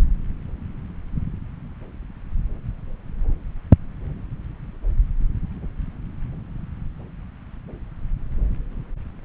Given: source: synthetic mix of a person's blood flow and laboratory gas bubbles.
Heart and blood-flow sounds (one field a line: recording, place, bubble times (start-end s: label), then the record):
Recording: Doppler ultrasound of blood flow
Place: subclavian vein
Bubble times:
no bubbles
From the record:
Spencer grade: 0 (complete lack of bubble signals)